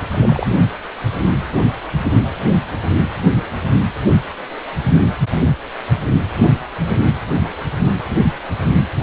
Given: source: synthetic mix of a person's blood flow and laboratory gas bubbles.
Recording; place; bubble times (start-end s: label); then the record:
Doppler ultrasound of blood flow; precordium
0.08-0.49 s: bubbles
From the record:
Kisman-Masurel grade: 212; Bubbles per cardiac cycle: several, 3 to 8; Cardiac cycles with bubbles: 1 to 10%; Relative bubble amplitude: moderate (0.250 to 0.450); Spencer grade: 1 (occasional bubble signal discernible with the cardiac motion signal, with majority of cardiac periods free of bubbles); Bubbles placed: anywhere in the cardiac cycle